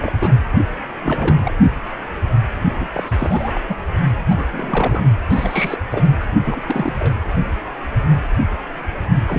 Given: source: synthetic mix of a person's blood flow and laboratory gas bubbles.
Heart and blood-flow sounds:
Doppler ultrasound of blood flow; precordium
0.00-0.13 s: bubbles
0.18-0.41 s: bubbles
1.03-1.56 s: bubbles
2.78-2.88 s: bubbles
2.93-3.60 s: bubbles
3.69-3.76 s: bubbles
4.29-4.44 s: bubbles
4.52-5.02 s: bubbles
5.30-5.78 s: bubbles
5.91-6.08 s: bubbles
6.20-6.24 s: bubbles
6.43-7.13 s: bubbles
9.27-9.38 s: bubbles
From the record:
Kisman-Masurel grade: 332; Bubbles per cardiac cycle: rolling drumbeat, 9 or more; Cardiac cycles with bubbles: 50 to 99%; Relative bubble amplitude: moderate (0.250 to 0.450); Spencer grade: 3 (all of the cardiac periods contain showers or single bubble signals, but not dominating or overriding the cardiac motion signals); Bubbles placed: only in the low amplitude regions of the cardiac cycle

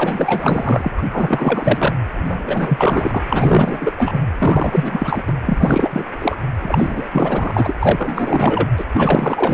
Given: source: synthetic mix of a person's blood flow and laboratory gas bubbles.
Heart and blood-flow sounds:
Doppler ultrasound of blood flow; precordium
0.00-0.91 s: bubbles
0.97-1.02 s: bubbles
1.11-1.95 s: bubbles
2.16-3.24 s: bubbles
3.29-3.93 s: bubbles
3.98-4.21 s: bubbles
4.38-5.24 s: bubbles
5.27-5.33 s: bubbles
5.46-6.04 s: bubbles
6.19-6.36 s: bubbles
6.59-7.08 s: bubbles
7.11-7.75 s: bubbles
7.79-8.68 s: bubbles
8.77-8.85 s: bubbles
8.94-9.54 s: bubbles
From the record:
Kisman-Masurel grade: 444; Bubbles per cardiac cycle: continuous sound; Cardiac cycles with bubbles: 100%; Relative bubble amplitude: maximal (0.775 to 0.999); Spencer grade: 4 (maximum detectable bubble signal sounding continuously throughout systole and diastole of every cardiac period, and overriding the amplitude of the normal cardiac signals); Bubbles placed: anywhere in the cardiac cycle

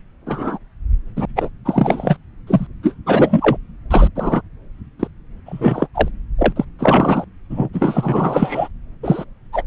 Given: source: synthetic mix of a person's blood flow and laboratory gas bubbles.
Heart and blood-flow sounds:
Doppler ultrasound of blood flow; subclavian vein
0.26-0.58 s: bubbles
1.16-1.25 s: bubbles
1.35-1.48 s: bubbles
1.65-2.17 s: bubbles
2.47-2.67 s: bubbles
2.83-2.94 s: bubbles
3.06-3.57 s: bubbles
3.90-4.08 s: bubbles
4.15-4.42 s: bubbles
4.99-5.08 s: bubbles
5.46-5.88 s: bubbles
5.94-6.08 s: bubbles
6.38-6.53 s: bubbles
6.56-6.65 s: bubbles
6.79-7.25 s: bubbles
7.50-7.69 s: bubbles
7.73-8.68 s: bubbles
9.03-9.24 s: bubbles
9.52-9.62 s: bubbles
From the record:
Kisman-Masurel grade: 243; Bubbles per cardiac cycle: several, 3 to 8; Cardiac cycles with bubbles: 100%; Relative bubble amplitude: loud (0.450 to 0.775); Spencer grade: 3 (all of the cardiac periods contain showers or single bubble signals, but not dominating or overriding the cardiac motion signals); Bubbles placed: anywhere in the cardiac cycle

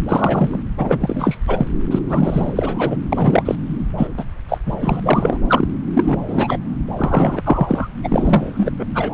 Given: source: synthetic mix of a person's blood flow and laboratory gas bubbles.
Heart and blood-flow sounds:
Doppler ultrasound of blood flow; subclavian vein
0.08-0.59 s: bubbles
0.78-1.38 s: bubbles
1.48-1.66 s: bubbles
1.91-1.99 s: bubbles
2.08-2.97 s: bubbles
3.12-3.55 s: bubbles
3.97-4.07 s: bubbles
4.17-4.24 s: bubbles
4.48-4.58 s: bubbles
4.65-5.00 s: bubbles
5.03-5.38 s: bubbles
5.47-5.68 s: bubbles
5.94-6.16 s: bubbles
6.27-6.57 s: bubbles
6.95-7.42 s: bubbles
7.44-7.87 s: bubbles
8.04-8.71 s: bubbles
8.79-8.85 s: bubbles
8.94-9.11 s: bubbles
From the record:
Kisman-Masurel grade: 343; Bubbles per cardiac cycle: rolling drumbeat, 9 or more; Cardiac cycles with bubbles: 100%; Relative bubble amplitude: loud (0.450 to 0.775); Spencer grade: 3 (all of the cardiac periods contain showers or single bubble signals, but not dominating or overriding the cardiac motion signals); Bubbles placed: anywhere in the cardiac cycle

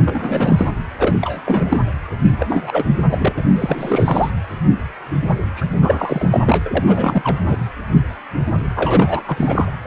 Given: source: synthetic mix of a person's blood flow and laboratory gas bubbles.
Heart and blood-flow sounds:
Doppler ultrasound of blood flow; precordium
0.04-0.69 s: bubbles
0.98-1.16 s: bubbles
1.21-1.40 s: bubbles
1.45-1.85 s: bubbles
2.24-2.84 s: bubbles
3.10-3.33 s: bubbles
3.38-3.43 s: bubbles
3.56-4.31 s: bubbles
5.56-5.66 s: bubbles
5.78-6.62 s: bubbles
6.66-6.83 s: bubbles
6.87-7.41 s: bubbles
7.47-7.57 s: bubbles
8.75-9.23 s: bubbles
9.26-9.71 s: bubbles
9.85-9.87 s: bubbles
From the record:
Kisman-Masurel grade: 332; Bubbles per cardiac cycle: rolling drumbeat, 9 or more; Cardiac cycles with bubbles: 50 to 99%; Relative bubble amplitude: moderate (0.250 to 0.450); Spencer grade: 3 (all of the cardiac periods contain showers or single bubble signals, but not dominating or overriding the cardiac motion signals); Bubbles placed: anywhere in the cardiac cycle

